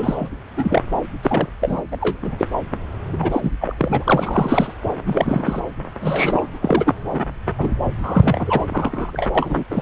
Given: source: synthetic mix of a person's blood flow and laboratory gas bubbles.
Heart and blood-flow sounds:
Doppler ultrasound of blood flow; subclavian vein
0.00-0.30 s: bubbles
0.56-0.82 s: bubbles
1.22-1.47 s: bubbles
1.61-1.83 s: bubbles
1.92-1.97 s: bubbles
2.00-2.17 s: bubbles
2.21-2.46 s: bubbles
3.12-3.17 s: bubbles
3.19-3.50 s: bubbles
3.60-3.75 s: bubbles
3.78-4.04 s: bubbles
4.07-4.74 s: bubbles
5.06-5.62 s: bubbles
6.00-6.46 s: bubbles
6.62-6.94 s: bubbles
7.12-7.20 s: bubbles
7.58-7.73 s: bubbles
8.03-8.65 s: bubbles
8.70-9.28 s: bubbles
9.35-9.64 s: bubbles
9.71-9.82 s: bubbles
From the record:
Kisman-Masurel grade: 243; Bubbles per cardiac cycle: several, 3 to 8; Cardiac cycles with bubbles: 100%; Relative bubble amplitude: loud (0.450 to 0.775); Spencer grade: 3 (all of the cardiac periods contain showers or single bubble signals, but not dominating or overriding the cardiac motion signals); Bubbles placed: anywhere in the cardiac cycle

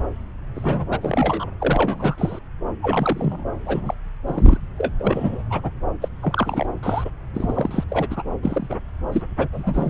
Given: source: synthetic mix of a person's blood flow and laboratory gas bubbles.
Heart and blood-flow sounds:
Doppler ultrasound of blood flow; subclavian vein
0.55-0.86 s: bubbles
0.90-1.46 s: bubbles
1.60-2.39 s: bubbles
2.82-3.44 s: bubbles
3.65-3.94 s: bubbles
4.27-4.58 s: bubbles
4.78-4.93 s: bubbles
5.00-5.43 s: bubbles
5.50-5.71 s: bubbles
6.01-6.08 s: bubbles
6.23-6.66 s: bubbles
6.83-7.10 s: bubbles
7.33-7.84 s: bubbles
7.89-8.08 s: bubbles
8.10-8.22 s: bubbles
8.42-8.76 s: bubbles
9.12-9.22 s: bubbles
9.38-9.47 s: bubbles
9.53-9.90 s: bubbles
From the record:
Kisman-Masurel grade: 242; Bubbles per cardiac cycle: several, 3 to 8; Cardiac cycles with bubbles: 100%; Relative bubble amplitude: moderate (0.250 to 0.450); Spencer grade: 3 (all of the cardiac periods contain showers or single bubble signals, but not dominating or overriding the cardiac motion signals); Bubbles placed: anywhere in the cardiac cycle

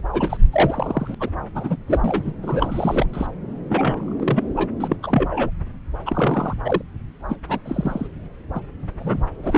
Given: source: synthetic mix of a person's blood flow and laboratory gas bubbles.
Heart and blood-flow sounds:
Doppler ultrasound of blood flow; subclavian vein
0.12-0.37 s: bubbles
0.52-1.15 s: bubbles
1.20-1.29 s: bubbles
1.55-1.77 s: bubbles
1.88-2.31 s: bubbles
2.42-3.06 s: bubbles
3.13-3.27 s: bubbles
3.69-4.14 s: bubbles
4.20-4.44 s: bubbles
4.57-4.68 s: bubbles
4.80-4.96 s: bubbles
5.03-5.50 s: bubbles
6.06-6.54 s: bubbles
6.65-6.82 s: bubbles
7.29-7.36 s: bubbles
7.48-7.58 s: bubbles
7.65-8.07 s: bubbles
8.54-8.60 s: bubbles
8.99-9.24 s: bubbles
9.43-9.58 s: bubbles
From the record:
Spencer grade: 3 (all of the cardiac periods contain showers or single bubble signals, but not dominating or overriding the cardiac motion signals); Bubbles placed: anywhere in the cardiac cycle

